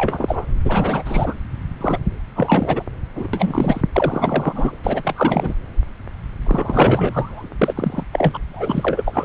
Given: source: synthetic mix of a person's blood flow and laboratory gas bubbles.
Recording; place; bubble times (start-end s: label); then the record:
Doppler ultrasound of blood flow; subclavian vein
0.00-0.46 s: bubbles
0.65-1.34 s: bubbles
1.80-1.98 s: bubbles
2.35-2.83 s: bubbles
3.15-3.27 s: bubbles
3.33-3.81 s: bubbles
3.93-4.76 s: bubbles
4.84-5.54 s: bubbles
6.46-7.48 s: bubbles
7.61-8.04 s: bubbles
8.12-8.38 s: bubbles
8.53-9.25 s: bubbles
From the record:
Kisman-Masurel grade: 343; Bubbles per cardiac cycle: rolling drumbeat, 9 or more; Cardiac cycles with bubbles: 100%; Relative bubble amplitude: loud (0.450 to 0.775); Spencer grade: 3 (all of the cardiac periods contain showers or single bubble signals, but not dominating or overriding the cardiac motion signals); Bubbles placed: anywhere in the cardiac cycle